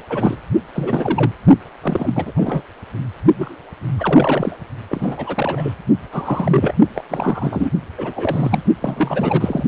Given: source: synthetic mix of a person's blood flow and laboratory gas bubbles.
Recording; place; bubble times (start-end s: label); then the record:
Doppler ultrasound of blood flow; precordium
0.00-0.02 s: bubbles
0.09-0.41 s: bubbles
0.74-1.32 s: bubbles
1.81-2.33 s: bubbles
2.36-2.63 s: bubbles
3.34-3.55 s: bubbles
3.99-4.58 s: bubbles
4.88-5.75 s: bubbles
6.12-6.75 s: bubbles
6.94-7.04 s: bubbles
7.09-7.70 s: bubbles
7.97-8.65 s: bubbles
8.81-9.63 s: bubbles
From the record:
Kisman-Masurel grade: 343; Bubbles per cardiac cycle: rolling drumbeat, 9 or more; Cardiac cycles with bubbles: 100%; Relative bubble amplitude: loud (0.450 to 0.775); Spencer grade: 3 (all of the cardiac periods contain showers or single bubble signals, but not dominating or overriding the cardiac motion signals); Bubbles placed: only in the low amplitude regions of the cardiac cycle